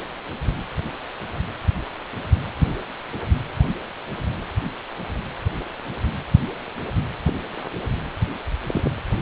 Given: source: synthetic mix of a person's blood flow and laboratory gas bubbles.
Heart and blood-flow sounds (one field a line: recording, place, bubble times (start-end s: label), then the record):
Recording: Doppler ultrasound of blood flow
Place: precordium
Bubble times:
7.27-7.33 s: bubbles
8.68-8.89 s: bubbles
From the record:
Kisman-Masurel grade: 121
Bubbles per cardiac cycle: 1 to 2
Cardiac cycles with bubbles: 10 to 50%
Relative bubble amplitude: barely perceptible (0.100 to 0.250)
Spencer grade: 2 (many but less than half of the cardiac periods contain bubble signals, singularly or in groups)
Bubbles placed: anywhere in the cardiac cycle